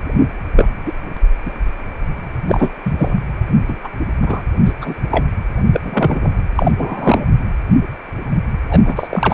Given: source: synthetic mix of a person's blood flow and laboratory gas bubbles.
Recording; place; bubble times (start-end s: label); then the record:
Doppler ultrasound of blood flow; precordium
0.56-0.70 s: bubbles
0.85-0.93 s: bubbles
1.45-1.54 s: bubbles
2.48-2.72 s: bubbles
2.83-3.14 s: bubbles
3.69-3.77 s: bubbles
3.83-3.89 s: bubbles
4.22-4.41 s: bubbles
4.65-4.73 s: bubbles
4.81-4.96 s: bubbles
5.11-5.26 s: bubbles
5.65-6.33 s: bubbles
6.55-6.71 s: bubbles
6.77-7.26 s: bubbles
8.69-9.34 s: bubbles
From the record:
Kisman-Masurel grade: 233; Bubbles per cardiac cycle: several, 3 to 8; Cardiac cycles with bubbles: 50 to 99%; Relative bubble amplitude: loud (0.450 to 0.775); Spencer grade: 3 (all of the cardiac periods contain showers or single bubble signals, but not dominating or overriding the cardiac motion signals); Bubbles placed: anywhere in the cardiac cycle